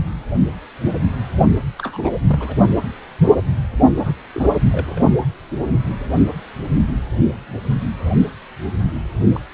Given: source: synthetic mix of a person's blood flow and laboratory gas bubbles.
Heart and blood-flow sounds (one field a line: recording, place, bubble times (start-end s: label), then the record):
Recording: Doppler ultrasound of blood flow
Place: precordium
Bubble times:
1.78-2.10 s: bubbles
2.28-2.55 s: bubbles
3.97-4.13 s: bubbles
4.34-4.50 s: bubbles
4.71-4.99 s: bubbles
9.34-9.41 s: bubbles
From the record:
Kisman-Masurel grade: 221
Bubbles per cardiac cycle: several, 3 to 8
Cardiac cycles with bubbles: 10 to 50%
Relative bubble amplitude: barely perceptible (0.100 to 0.250)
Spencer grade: 2 (many but less than half of the cardiac periods contain bubble signals, singularly or in groups)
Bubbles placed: only in the low amplitude regions of the cardiac cycle